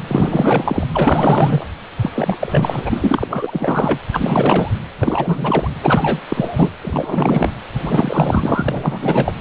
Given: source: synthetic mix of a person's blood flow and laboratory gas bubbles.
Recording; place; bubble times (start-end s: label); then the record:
Doppler ultrasound of blood flow; precordium
0.07-0.85 s: bubbles
0.94-1.66 s: bubbles
2.01-2.10 s: bubbles
2.15-3.99 s: bubbles
4.12-4.71 s: bubbles
5.00-5.71 s: bubbles
5.83-6.21 s: bubbles
6.29-6.71 s: bubbles
6.82-7.51 s: bubbles
7.78-9.32 s: bubbles
From the record:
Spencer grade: 4 (maximum detectable bubble signal sounding continuously throughout systole and diastole of every cardiac period, and overriding the amplitude of the normal cardiac signals); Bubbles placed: anywhere in the cardiac cycle